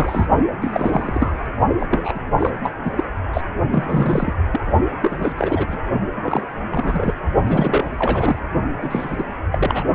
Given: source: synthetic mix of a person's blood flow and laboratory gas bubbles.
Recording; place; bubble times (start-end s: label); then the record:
Doppler ultrasound of blood flow; precordium
0.00-0.27 s: bubbles
0.61-1.46 s: bubbles
1.78-1.86 s: bubbles
1.91-2.21 s: bubbles
2.39-2.50 s: bubbles
2.62-2.71 s: bubbles
2.83-3.07 s: bubbles
3.33-3.41 s: bubbles
3.71-4.33 s: bubbles
4.52-4.60 s: bubbles
5.00-5.33 s: bubbles
5.37-5.78 s: bubbles
6.15-6.48 s: bubbles
6.70-7.13 s: bubbles
7.46-8.39 s: bubbles
8.81-9.25 s: bubbles
9.52-9.84 s: bubbles
From the record:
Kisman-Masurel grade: 342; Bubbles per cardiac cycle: rolling drumbeat, 9 or more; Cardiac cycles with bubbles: 100%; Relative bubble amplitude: moderate (0.250 to 0.450); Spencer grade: 3 (all of the cardiac periods contain showers or single bubble signals, but not dominating or overriding the cardiac motion signals); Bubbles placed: only in the low amplitude regions of the cardiac cycle